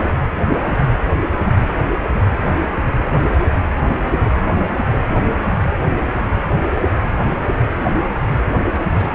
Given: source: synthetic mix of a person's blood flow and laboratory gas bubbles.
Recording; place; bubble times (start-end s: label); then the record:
Doppler ultrasound of blood flow; precordium
8.71-8.84 s: bubbles
8.88-9.15 s: bubbles
From the record:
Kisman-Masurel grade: 211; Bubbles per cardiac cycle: several, 3 to 8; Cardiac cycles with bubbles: 1 to 10%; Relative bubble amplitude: barely perceptible (0.100 to 0.250); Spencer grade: 1 (occasional bubble signal discernible with the cardiac motion signal, with majority of cardiac periods free of bubbles); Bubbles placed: anywhere in the cardiac cycle